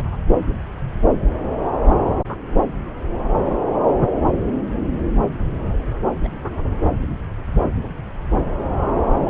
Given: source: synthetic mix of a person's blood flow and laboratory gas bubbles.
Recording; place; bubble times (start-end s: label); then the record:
Doppler ultrasound of blood flow; subclavian vein
0.00-0.05 s: bubbles
2.06-2.15 s: bubbles
6.24-6.28 s: bubbles
9.13-9.28 s: bubbles
From the record:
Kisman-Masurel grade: 121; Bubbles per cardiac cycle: 1 to 2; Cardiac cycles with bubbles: 10 to 50%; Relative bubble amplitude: barely perceptible (0.100 to 0.250); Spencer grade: 2 (many but less than half of the cardiac periods contain bubble signals, singularly or in groups); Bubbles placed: anywhere in the cardiac cycle